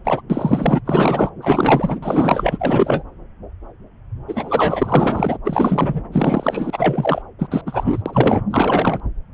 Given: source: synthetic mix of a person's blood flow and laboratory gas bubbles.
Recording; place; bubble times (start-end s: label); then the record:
Doppler ultrasound of blood flow; subclavian vein
0.04-0.21 s: bubbles
0.29-0.81 s: bubbles
0.85-1.31 s: bubbles
1.42-1.99 s: bubbles
2.02-3.03 s: bubbles
4.28-5.38 s: bubbles
5.44-6.01 s: bubbles
6.11-7.22 s: bubbles
7.38-7.47 s: bubbles
7.50-7.62 s: bubbles
7.66-8.02 s: bubbles
8.05-8.43 s: bubbles
8.50-9.00 s: bubbles
From the record:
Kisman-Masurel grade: 333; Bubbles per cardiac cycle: rolling drumbeat, 9 or more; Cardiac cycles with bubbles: 50 to 99%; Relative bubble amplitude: loud (0.450 to 0.775); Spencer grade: 3 (all of the cardiac periods contain showers or single bubble signals, but not dominating or overriding the cardiac motion signals); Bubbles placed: anywhere in the cardiac cycle